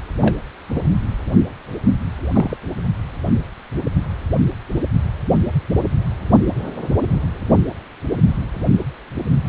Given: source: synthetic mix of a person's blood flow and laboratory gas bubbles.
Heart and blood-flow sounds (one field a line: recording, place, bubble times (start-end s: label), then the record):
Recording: Doppler ultrasound of blood flow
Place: precordium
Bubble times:
0.21-0.35 s: bubbles
0.70-0.81 s: bubbles
2.33-2.57 s: bubbles
From the record:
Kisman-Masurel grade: 122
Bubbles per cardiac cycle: 1 to 2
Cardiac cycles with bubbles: 10 to 50%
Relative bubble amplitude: moderate (0.250 to 0.450)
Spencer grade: 2 (many but less than half of the cardiac periods contain bubble signals, singularly or in groups)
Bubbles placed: anywhere in the cardiac cycle